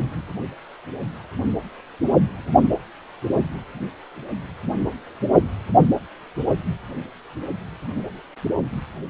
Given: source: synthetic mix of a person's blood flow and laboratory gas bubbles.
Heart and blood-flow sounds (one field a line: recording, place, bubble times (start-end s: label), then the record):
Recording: Doppler ultrasound of blood flow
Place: precordium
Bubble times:
no bubbles
From the record:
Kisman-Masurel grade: 000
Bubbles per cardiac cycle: 0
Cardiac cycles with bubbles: 0%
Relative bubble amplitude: no bubbles discernible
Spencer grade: 0 (complete lack of bubble signals)